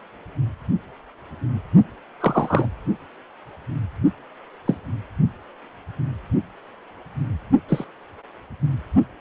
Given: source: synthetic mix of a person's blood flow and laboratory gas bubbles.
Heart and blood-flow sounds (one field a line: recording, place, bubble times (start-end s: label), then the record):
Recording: Doppler ultrasound of blood flow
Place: precordium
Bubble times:
2.20-2.66 s: bubbles
4.66-4.75 s: bubbles
7.69-7.85 s: bubbles
From the record:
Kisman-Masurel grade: 122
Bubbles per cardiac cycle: 1 to 2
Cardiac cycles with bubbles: 10 to 50%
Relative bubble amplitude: moderate (0.250 to 0.450)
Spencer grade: 2 (many but less than half of the cardiac periods contain bubble signals, singularly or in groups)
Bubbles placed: only in the low amplitude regions of the cardiac cycle